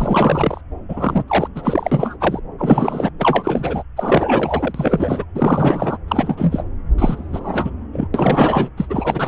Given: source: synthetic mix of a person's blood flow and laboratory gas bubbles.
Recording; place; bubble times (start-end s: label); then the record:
Doppler ultrasound of blood flow; subclavian vein
0.00-0.61 s: bubbles
0.89-1.24 s: bubbles
1.27-1.48 s: bubbles
1.55-2.39 s: bubbles
2.58-3.10 s: bubbles
3.18-3.83 s: bubbles
3.96-5.25 s: bubbles
5.35-5.97 s: bubbles
6.08-6.63 s: bubbles
6.98-7.71 s: bubbles
7.92-8.07 s: bubbles
8.14-8.70 s: bubbles
8.77-9.27 s: bubbles
From the record:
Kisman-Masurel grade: 343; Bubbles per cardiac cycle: rolling drumbeat, 9 or more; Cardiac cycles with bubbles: 100%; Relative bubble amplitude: loud (0.450 to 0.775); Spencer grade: 3 (all of the cardiac periods contain showers or single bubble signals, but not dominating or overriding the cardiac motion signals); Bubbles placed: anywhere in the cardiac cycle